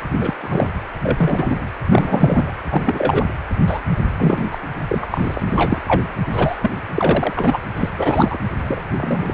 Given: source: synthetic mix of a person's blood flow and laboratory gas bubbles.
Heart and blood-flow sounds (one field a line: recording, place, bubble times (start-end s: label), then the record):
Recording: Doppler ultrasound of blood flow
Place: precordium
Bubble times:
0.20-0.34 s: bubbles
0.41-0.71 s: bubbles
1.03-1.68 s: bubbles
1.90-2.53 s: bubbles
2.69-3.25 s: bubbles
3.67-3.80 s: bubbles
4.17-4.45 s: bubbles
4.51-4.58 s: bubbles
4.89-5.07 s: bubbles
5.10-5.41 s: bubbles
5.46-5.84 s: bubbles
5.87-6.03 s: bubbles
6.32-6.57 s: bubbles
6.62-6.71 s: bubbles
6.96-7.58 s: bubbles
7.76-7.89 s: bubbles
7.97-8.38 s: bubbles
8.62-8.85 s: bubbles
8.98-9.34 s: bubbles
From the record:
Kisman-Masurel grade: 243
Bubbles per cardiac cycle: several, 3 to 8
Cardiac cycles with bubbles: 100%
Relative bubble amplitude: loud (0.450 to 0.775)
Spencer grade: 3 (all of the cardiac periods contain showers or single bubble signals, but not dominating or overriding the cardiac motion signals)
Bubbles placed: anywhere in the cardiac cycle